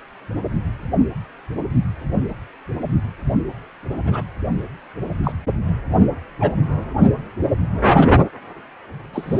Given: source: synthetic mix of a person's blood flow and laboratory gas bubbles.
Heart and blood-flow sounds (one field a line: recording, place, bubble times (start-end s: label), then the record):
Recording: Doppler ultrasound of blood flow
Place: precordium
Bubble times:
4.05-4.23 s: bubbles
5.23-5.33 s: bubbles
6.40-6.52 s: bubbles
9.13-9.40 s: bubbles
From the record:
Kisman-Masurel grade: 122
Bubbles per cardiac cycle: 1 to 2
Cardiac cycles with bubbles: 10 to 50%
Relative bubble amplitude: moderate (0.250 to 0.450)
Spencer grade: 2 (many but less than half of the cardiac periods contain bubble signals, singularly or in groups)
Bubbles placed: only in the low amplitude regions of the cardiac cycle